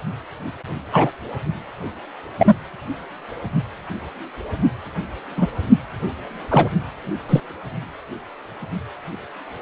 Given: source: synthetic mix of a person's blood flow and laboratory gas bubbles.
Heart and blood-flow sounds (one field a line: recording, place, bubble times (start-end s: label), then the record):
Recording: Doppler ultrasound of blood flow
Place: precordium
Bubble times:
0.92-1.10 s: bubbles
2.38-2.54 s: bubbles
5.37-5.48 s: bubbles
6.49-6.71 s: bubbles
7.29-7.40 s: bubbles
From the record:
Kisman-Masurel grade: 123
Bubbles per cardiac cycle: 1 to 2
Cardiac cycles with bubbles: 10 to 50%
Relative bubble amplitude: loud (0.450 to 0.775)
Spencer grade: 2 (many but less than half of the cardiac periods contain bubble signals, singularly or in groups)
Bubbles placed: anywhere in the cardiac cycle